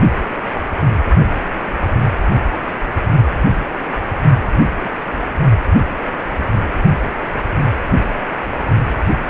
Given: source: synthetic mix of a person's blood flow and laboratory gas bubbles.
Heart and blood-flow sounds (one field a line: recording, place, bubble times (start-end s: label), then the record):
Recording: Doppler ultrasound of blood flow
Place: precordium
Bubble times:
4.77-4.98 s: bubbles
From the record:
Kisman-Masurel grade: 121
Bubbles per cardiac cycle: 1 to 2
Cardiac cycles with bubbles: 10 to 50%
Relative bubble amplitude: barely perceptible (0.100 to 0.250)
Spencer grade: 2 (many but less than half of the cardiac periods contain bubble signals, singularly or in groups)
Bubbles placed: only in the low amplitude regions of the cardiac cycle